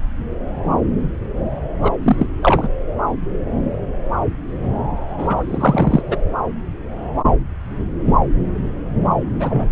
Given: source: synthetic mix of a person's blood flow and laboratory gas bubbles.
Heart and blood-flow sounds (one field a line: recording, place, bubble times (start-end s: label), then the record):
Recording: Doppler ultrasound of blood flow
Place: subclavian vein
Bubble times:
1.81-1.92 s: bubbles
2.02-2.27 s: bubbles
2.42-2.68 s: bubbles
5.18-5.43 s: bubbles
5.50-6.03 s: bubbles
6.07-6.17 s: bubbles
9.39-9.72 s: bubbles
From the record:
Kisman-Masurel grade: 223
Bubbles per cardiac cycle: several, 3 to 8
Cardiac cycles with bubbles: 10 to 50%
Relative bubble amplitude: loud (0.450 to 0.775)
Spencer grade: 2 (many but less than half of the cardiac periods contain bubble signals, singularly or in groups)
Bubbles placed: anywhere in the cardiac cycle